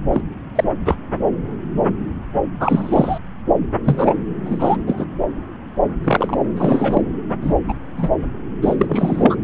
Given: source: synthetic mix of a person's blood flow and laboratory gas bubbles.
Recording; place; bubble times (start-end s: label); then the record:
Doppler ultrasound of blood flow; subclavian vein
0.12-0.22 s: bubbles
0.55-0.64 s: bubbles
0.84-0.95 s: bubbles
2.60-3.19 s: bubbles
3.85-4.14 s: bubbles
4.46-4.76 s: bubbles
4.87-5.06 s: bubbles
6.04-6.38 s: bubbles
6.56-7.01 s: bubbles
7.41-7.54 s: bubbles
7.68-7.73 s: bubbles
7.96-8.09 s: bubbles
8.62-9.37 s: bubbles
From the record:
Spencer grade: 3 (all of the cardiac periods contain showers or single bubble signals, but not dominating or overriding the cardiac motion signals); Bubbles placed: anywhere in the cardiac cycle